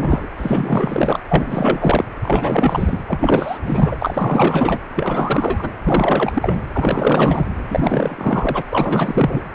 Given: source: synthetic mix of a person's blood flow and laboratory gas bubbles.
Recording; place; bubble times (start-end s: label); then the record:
Doppler ultrasound of blood flow; precordium
0.00-0.29 s: bubbles
0.37-1.20 s: bubbles
1.29-2.04 s: bubbles
2.23-2.99 s: bubbles
3.07-3.57 s: bubbles
3.65-3.96 s: bubbles
3.99-4.79 s: bubbles
4.95-5.75 s: bubbles
5.84-6.66 s: bubbles
6.73-7.52 s: bubbles
7.68-8.62 s: bubbles
8.69-9.43 s: bubbles
From the record:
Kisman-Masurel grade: 444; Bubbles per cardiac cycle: continuous sound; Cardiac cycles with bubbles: 100%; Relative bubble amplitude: maximal (0.775 to 0.999); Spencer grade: 4 (maximum detectable bubble signal sounding continuously throughout systole and diastole of every cardiac period, and overriding the amplitude of the normal cardiac signals); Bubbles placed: anywhere in the cardiac cycle